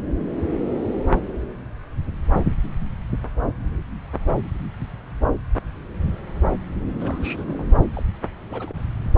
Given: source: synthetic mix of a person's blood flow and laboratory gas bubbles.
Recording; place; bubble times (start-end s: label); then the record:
Doppler ultrasound of blood flow; subclavian vein
7.00-7.65 s: bubbles
7.93-8.03 s: bubbles
8.48-8.80 s: bubbles
From the record:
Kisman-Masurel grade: 221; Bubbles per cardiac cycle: several, 3 to 8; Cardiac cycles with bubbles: 10 to 50%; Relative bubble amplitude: barely perceptible (0.100 to 0.250); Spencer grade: 2 (many but less than half of the cardiac periods contain bubble signals, singularly or in groups); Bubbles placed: anywhere in the cardiac cycle